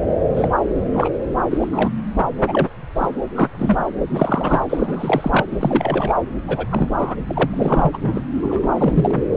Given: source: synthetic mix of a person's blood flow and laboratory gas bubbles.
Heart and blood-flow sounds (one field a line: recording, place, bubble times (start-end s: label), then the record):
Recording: Doppler ultrasound of blood flow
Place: subclavian vein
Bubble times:
0.36-0.49 s: bubbles
0.94-1.09 s: bubbles
1.51-1.68 s: bubbles
1.72-1.90 s: bubbles
2.47-2.68 s: bubbles
2.95-3.08 s: bubbles
3.34-3.48 s: bubbles
3.58-3.85 s: bubbles
4.10-4.62 s: bubbles
4.69-5.44 s: bubbles
5.51-6.13 s: bubbles
6.47-6.66 s: bubbles
6.71-6.88 s: bubbles
6.98-7.15 s: bubbles
7.27-7.50 s: bubbles
7.53-7.90 s: bubbles
7.93-7.98 s: bubbles
8.02-8.24 s: bubbles
8.43-9.23 s: bubbles
9.31-9.36 s: bubbles
From the record:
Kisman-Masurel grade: 243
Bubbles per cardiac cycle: several, 3 to 8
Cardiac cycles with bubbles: 100%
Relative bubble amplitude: loud (0.450 to 0.775)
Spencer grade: 3 (all of the cardiac periods contain showers or single bubble signals, but not dominating or overriding the cardiac motion signals)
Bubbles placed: anywhere in the cardiac cycle